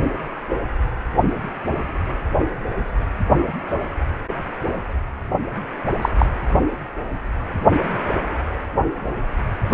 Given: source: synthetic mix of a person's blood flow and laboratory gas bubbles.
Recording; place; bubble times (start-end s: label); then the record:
Doppler ultrasound of blood flow; precordium
6.01-6.09 s: bubbles
6.19-6.26 s: bubbles
From the record:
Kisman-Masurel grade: 113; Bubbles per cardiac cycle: 1 to 2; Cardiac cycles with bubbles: 1 to 10%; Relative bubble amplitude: loud (0.450 to 0.775); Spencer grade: 1 (occasional bubble signal discernible with the cardiac motion signal, with majority of cardiac periods free of bubbles); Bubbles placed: anywhere in the cardiac cycle